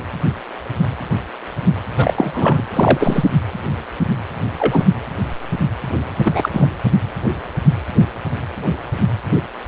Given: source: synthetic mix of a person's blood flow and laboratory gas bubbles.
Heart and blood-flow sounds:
Doppler ultrasound of blood flow; precordium
1.93-2.62 s: bubbles
2.73-3.24 s: bubbles
4.58-4.87 s: bubbles
6.25-6.49 s: bubbles
6.53-6.69 s: bubbles
From the record:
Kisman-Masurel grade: 223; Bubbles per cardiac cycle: several, 3 to 8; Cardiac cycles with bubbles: 10 to 50%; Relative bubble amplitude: loud (0.450 to 0.775); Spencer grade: 2 (many but less than half of the cardiac periods contain bubble signals, singularly or in groups); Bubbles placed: anywhere in the cardiac cycle

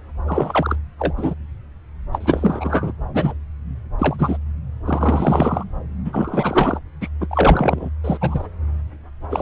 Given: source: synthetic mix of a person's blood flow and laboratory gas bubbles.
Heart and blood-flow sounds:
Doppler ultrasound of blood flow; subclavian vein
0.27-0.76 s: bubbles
0.99-1.34 s: bubbles
2.12-2.92 s: bubbles
3.14-3.33 s: bubbles
3.99-4.38 s: bubbles
4.85-5.64 s: bubbles
6.04-6.79 s: bubbles
7.01-7.08 s: bubbles
7.21-7.27 s: bubbles
7.30-7.89 s: bubbles
8.04-8.17 s: bubbles
8.21-8.47 s: bubbles
9.29-9.41 s: bubbles
From the record:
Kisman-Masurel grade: 243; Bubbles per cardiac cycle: several, 3 to 8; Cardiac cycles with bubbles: 100%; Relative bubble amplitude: loud (0.450 to 0.775); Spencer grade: 3 (all of the cardiac periods contain showers or single bubble signals, but not dominating or overriding the cardiac motion signals); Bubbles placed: anywhere in the cardiac cycle

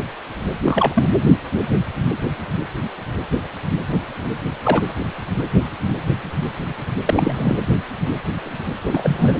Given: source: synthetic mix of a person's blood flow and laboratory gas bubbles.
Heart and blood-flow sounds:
Doppler ultrasound of blood flow; precordium
0.62-1.07 s: bubbles
4.64-4.83 s: bubbles
7.05-7.56 s: bubbles
8.84-9.33 s: bubbles
From the record:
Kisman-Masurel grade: 223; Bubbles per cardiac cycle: several, 3 to 8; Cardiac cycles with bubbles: 10 to 50%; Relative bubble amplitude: loud (0.450 to 0.775); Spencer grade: 2 (many but less than half of the cardiac periods contain bubble signals, singularly or in groups); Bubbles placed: anywhere in the cardiac cycle

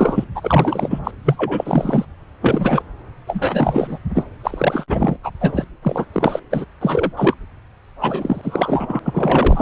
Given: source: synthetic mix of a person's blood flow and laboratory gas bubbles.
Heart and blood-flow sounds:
Doppler ultrasound of blood flow; subclavian vein
0.00-0.24 s: bubbles
0.35-0.99 s: bubbles
1.04-1.11 s: bubbles
1.24-2.05 s: bubbles
2.42-2.83 s: bubbles
3.27-3.99 s: bubbles
4.14-4.25 s: bubbles
4.41-4.84 s: bubbles
4.89-5.17 s: bubbles
5.23-5.30 s: bubbles
5.41-5.64 s: bubbles
5.83-6.05 s: bubbles
6.13-6.39 s: bubbles
6.50-6.65 s: bubbles
6.81-7.12 s: bubbles
7.17-7.34 s: bubbles
8.01-9.00 s: bubbles
9.05-9.61 s: bubbles
From the record:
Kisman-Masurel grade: 343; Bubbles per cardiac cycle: rolling drumbeat, 9 or more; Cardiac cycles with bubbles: 100%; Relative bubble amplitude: loud (0.450 to 0.775); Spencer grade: 3 (all of the cardiac periods contain showers or single bubble signals, but not dominating or overriding the cardiac motion signals); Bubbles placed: anywhere in the cardiac cycle

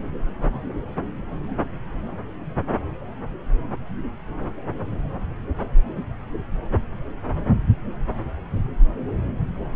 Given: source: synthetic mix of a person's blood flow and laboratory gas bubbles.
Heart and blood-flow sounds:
Doppler ultrasound of blood flow; subclavian vein
no bubbles
From the record:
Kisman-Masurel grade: 000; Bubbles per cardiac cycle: 0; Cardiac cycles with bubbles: 0%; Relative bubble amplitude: no bubbles discernible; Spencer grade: 0 (complete lack of bubble signals)

